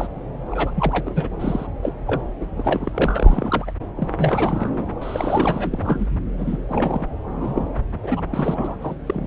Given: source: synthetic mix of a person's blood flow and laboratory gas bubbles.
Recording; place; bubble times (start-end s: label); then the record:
Doppler ultrasound of blood flow; subclavian vein
0.00-0.08 s: bubbles
0.52-0.71 s: bubbles
0.75-1.28 s: bubbles
1.40-1.67 s: bubbles
1.83-1.92 s: bubbles
2.07-2.20 s: bubbles
2.40-2.46 s: bubbles
2.56-3.71 s: bubbles
3.95-4.09 s: bubbles
4.17-4.85 s: bubbles
5.01-6.07 s: bubbles
6.37-6.57 s: bubbles
6.69-7.06 s: bubbles
7.40-7.71 s: bubbles
8.03-8.21 s: bubbles
8.31-8.76 s: bubbles
8.80-8.94 s: bubbles
9.06-9.27 s: bubbles
From the record:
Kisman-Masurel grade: 342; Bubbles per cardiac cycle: rolling drumbeat, 9 or more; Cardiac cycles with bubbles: 100%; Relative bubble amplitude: moderate (0.250 to 0.450); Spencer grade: 3 (all of the cardiac periods contain showers or single bubble signals, but not dominating or overriding the cardiac motion signals); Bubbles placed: anywhere in the cardiac cycle